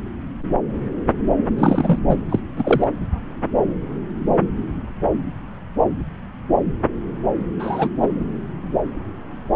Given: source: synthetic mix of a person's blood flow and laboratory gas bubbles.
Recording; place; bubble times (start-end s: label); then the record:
Doppler ultrasound of blood flow; subclavian vein
1.58-1.99 s: bubbles
2.07-2.17 s: bubbles
2.29-2.40 s: bubbles
2.56-2.88 s: bubbles
7.59-7.90 s: bubbles
8.02-8.08 s: bubbles
From the record:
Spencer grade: 2 (many but less than half of the cardiac periods contain bubble signals, singularly or in groups); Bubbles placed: anywhere in the cardiac cycle